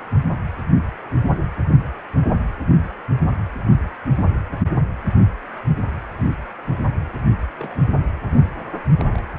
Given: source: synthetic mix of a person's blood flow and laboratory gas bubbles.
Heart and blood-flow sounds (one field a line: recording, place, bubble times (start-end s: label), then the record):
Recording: Doppler ultrasound of blood flow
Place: precordium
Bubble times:
7.59-7.84 s: bubbles
9.00-9.04 s: bubbles
9.12-9.23 s: bubbles
From the record:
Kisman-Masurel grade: 121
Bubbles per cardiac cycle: 1 to 2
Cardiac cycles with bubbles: 10 to 50%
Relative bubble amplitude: barely perceptible (0.100 to 0.250)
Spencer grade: 2 (many but less than half of the cardiac periods contain bubble signals, singularly or in groups)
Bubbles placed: only in the low amplitude regions of the cardiac cycle